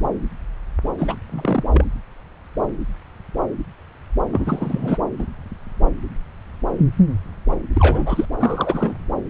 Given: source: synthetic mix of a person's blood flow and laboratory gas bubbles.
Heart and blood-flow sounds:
Doppler ultrasound of blood flow; subclavian vein
0.98-1.16 s: bubbles
1.30-1.64 s: bubbles
1.72-1.84 s: bubbles
4.32-4.97 s: bubbles
5.18-5.26 s: bubbles
7.74-8.25 s: bubbles
8.39-8.95 s: bubbles
From the record:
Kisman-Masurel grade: 222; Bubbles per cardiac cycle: several, 3 to 8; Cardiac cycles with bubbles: 10 to 50%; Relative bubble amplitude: moderate (0.250 to 0.450); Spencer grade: 2 (many but less than half of the cardiac periods contain bubble signals, singularly or in groups); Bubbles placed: anywhere in the cardiac cycle

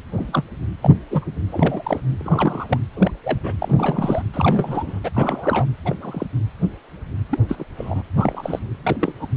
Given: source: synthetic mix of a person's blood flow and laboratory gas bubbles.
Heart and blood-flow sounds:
Doppler ultrasound of blood flow; precordium
0.17-0.43 s: bubbles
0.82-0.91 s: bubbles
1.10-1.25 s: bubbles
1.47-2.00 s: bubbles
2.19-2.78 s: bubbles
2.94-3.11 s: bubbles
3.24-3.38 s: bubbles
3.43-3.54 s: bubbles
3.58-4.22 s: bubbles
4.33-5.00 s: bubbles
5.04-5.10 s: bubbles
5.13-5.65 s: bubbles
5.84-5.96 s: bubbles
6.01-6.26 s: bubbles
7.29-7.39 s: bubbles
7.48-7.65 s: bubbles
7.77-8.02 s: bubbles
8.17-8.59 s: bubbles
8.83-8.96 s: bubbles
9.02-9.13 s: bubbles
9.20-9.29 s: bubbles
From the record:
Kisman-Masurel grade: 232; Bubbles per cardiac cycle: several, 3 to 8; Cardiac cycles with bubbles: 50 to 99%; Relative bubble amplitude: moderate (0.250 to 0.450); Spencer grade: 3 (all of the cardiac periods contain showers or single bubble signals, but not dominating or overriding the cardiac motion signals); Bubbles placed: anywhere in the cardiac cycle

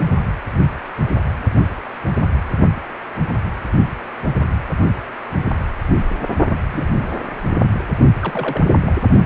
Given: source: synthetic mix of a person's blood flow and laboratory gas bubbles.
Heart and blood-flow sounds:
Doppler ultrasound of blood flow; precordium
6.72-6.86 s: bubbles
7.03-7.09 s: bubbles
8.21-8.66 s: bubbles
8.87-8.92 s: bubbles
From the record:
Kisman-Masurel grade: 122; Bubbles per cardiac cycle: 1 to 2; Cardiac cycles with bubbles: 10 to 50%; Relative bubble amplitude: moderate (0.250 to 0.450); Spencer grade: 2 (many but less than half of the cardiac periods contain bubble signals, singularly or in groups); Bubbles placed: only in the low amplitude regions of the cardiac cycle

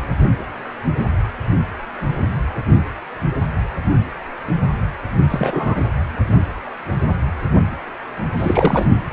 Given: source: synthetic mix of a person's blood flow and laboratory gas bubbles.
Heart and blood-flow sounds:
Doppler ultrasound of blood flow; precordium
5.30-5.81 s: bubbles
8.38-8.85 s: bubbles
From the record:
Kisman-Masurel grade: 213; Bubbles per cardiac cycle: several, 3 to 8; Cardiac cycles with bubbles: 1 to 10%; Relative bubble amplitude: loud (0.450 to 0.775); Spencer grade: 1 (occasional bubble signal discernible with the cardiac motion signal, with majority of cardiac periods free of bubbles); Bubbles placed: anywhere in the cardiac cycle

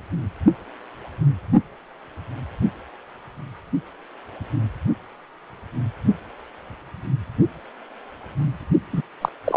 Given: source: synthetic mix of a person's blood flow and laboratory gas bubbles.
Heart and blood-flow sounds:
Doppler ultrasound of blood flow; precordium
8.93-9.02 s: bubbles
9.21-9.29 s: bubbles
9.44-9.56 s: bubbles
From the record:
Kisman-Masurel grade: 213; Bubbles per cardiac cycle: several, 3 to 8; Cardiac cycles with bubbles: 1 to 10%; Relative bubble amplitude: loud (0.450 to 0.775); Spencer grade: 1 (occasional bubble signal discernible with the cardiac motion signal, with majority of cardiac periods free of bubbles); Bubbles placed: only in the low amplitude regions of the cardiac cycle

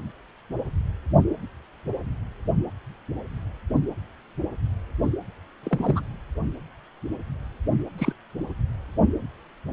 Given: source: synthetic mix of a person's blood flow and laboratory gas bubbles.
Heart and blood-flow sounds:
Doppler ultrasound of blood flow; precordium
5.63-6.00 s: bubbles
7.98-8.12 s: bubbles
From the record:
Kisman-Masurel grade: 112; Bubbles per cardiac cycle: 1 to 2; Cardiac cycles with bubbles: 1 to 10%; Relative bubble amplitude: moderate (0.250 to 0.450); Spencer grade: 1 (occasional bubble signal discernible with the cardiac motion signal, with majority of cardiac periods free of bubbles); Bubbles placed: anywhere in the cardiac cycle

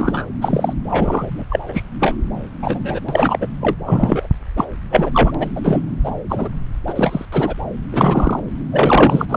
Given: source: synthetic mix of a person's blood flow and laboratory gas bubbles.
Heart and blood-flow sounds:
Doppler ultrasound of blood flow; subclavian vein
0.00-0.27 s: bubbles
0.41-0.73 s: bubbles
0.89-1.45 s: bubbles
1.50-1.59 s: bubbles
1.68-1.84 s: bubbles
2.00-2.15 s: bubbles
2.62-2.99 s: bubbles
3.08-3.47 s: bubbles
3.61-3.73 s: bubbles
3.85-4.28 s: bubbles
4.57-4.65 s: bubbles
4.91-5.32 s: bubbles
5.34-5.47 s: bubbles
5.56-5.61 s: bubbles
5.64-5.82 s: bubbles
6.04-6.11 s: bubbles
6.29-6.49 s: bubbles
6.87-7.25 s: bubbles
7.32-7.54 s: bubbles
7.92-8.41 s: bubbles
8.71-9.26 s: bubbles
9.29-9.37 s: bubbles
From the record:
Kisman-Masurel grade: 243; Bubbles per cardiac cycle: several, 3 to 8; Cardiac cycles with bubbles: 100%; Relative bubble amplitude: loud (0.450 to 0.775); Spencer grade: 3 (all of the cardiac periods contain showers or single bubble signals, but not dominating or overriding the cardiac motion signals); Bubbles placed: anywhere in the cardiac cycle

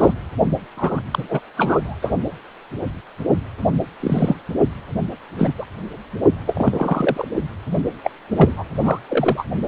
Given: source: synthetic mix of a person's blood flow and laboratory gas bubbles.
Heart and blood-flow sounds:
Doppler ultrasound of blood flow; precordium
0.00-0.13 s: bubbles
0.77-1.01 s: bubbles
1.12-1.41 s: bubbles
1.57-1.96 s: bubbles
2.02-2.14 s: bubbles
4.00-4.34 s: bubbles
5.38-5.52 s: bubbles
5.58-5.64 s: bubbles
6.46-7.28 s: bubbles
8.04-8.11 s: bubbles
8.37-8.64 s: bubbles
8.82-8.99 s: bubbles
9.08-9.44 s: bubbles
From the record:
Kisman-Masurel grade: 233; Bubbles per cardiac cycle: several, 3 to 8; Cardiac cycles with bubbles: 50 to 99%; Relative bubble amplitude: loud (0.450 to 0.775); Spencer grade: 3 (all of the cardiac periods contain showers or single bubble signals, but not dominating or overriding the cardiac motion signals); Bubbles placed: anywhere in the cardiac cycle

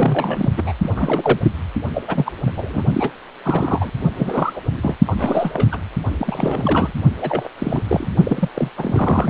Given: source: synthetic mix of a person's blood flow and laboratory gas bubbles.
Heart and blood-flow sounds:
Doppler ultrasound of blood flow; precordium
0.00-0.52 s: bubbles
0.57-0.73 s: bubbles
0.81-0.90 s: bubbles
0.95-1.40 s: bubbles
1.42-1.52 s: bubbles
1.94-2.02 s: bubbles
2.07-2.32 s: bubbles
2.46-2.52 s: bubbles
2.56-2.83 s: bubbles
2.94-3.11 s: bubbles
3.44-3.90 s: bubbles
4.15-4.60 s: bubbles
4.74-4.95 s: bubbles
5.06-5.78 s: bubbles
6.19-6.92 s: bubbles
7.20-7.48 s: bubbles
7.58-7.83 s: bubbles
7.88-8.11 s: bubbles
8.24-8.48 s: bubbles
8.54-8.71 s: bubbles
8.77-9.30 s: bubbles
From the record:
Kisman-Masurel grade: 342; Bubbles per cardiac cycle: rolling drumbeat, 9 or more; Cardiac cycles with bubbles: 100%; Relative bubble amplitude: moderate (0.250 to 0.450); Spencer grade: 3 (all of the cardiac periods contain showers or single bubble signals, but not dominating or overriding the cardiac motion signals); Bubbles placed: only in the low amplitude regions of the cardiac cycle

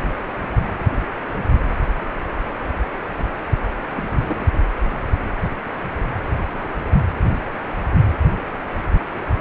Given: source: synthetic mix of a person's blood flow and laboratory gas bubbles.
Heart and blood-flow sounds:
Doppler ultrasound of blood flow; precordium
3.96-4.03 s: bubbles
4.09-4.46 s: bubbles
From the record:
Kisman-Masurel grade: 111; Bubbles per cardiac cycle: 1 to 2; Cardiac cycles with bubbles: 1 to 10%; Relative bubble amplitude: barely perceptible (0.100 to 0.250); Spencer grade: 1 (occasional bubble signal discernible with the cardiac motion signal, with majority of cardiac periods free of bubbles); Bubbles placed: anywhere in the cardiac cycle

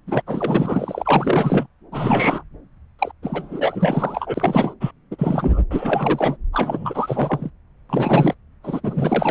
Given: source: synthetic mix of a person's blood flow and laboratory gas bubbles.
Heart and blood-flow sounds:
Doppler ultrasound of blood flow; subclavian vein
0.06-0.22 s: bubbles
0.27-1.67 s: bubbles
1.92-2.43 s: bubbles
2.98-3.12 s: bubbles
3.23-4.74 s: bubbles
4.80-4.91 s: bubbles
5.11-5.63 s: bubbles
5.70-6.37 s: bubbles
6.52-7.50 s: bubbles
7.89-8.34 s: bubbles
8.63-8.80 s: bubbles
8.83-9.31 s: bubbles
From the record:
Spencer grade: 4 (maximum detectable bubble signal sounding continuously throughout systole and diastole of every cardiac period, and overriding the amplitude of the normal cardiac signals); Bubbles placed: anywhere in the cardiac cycle

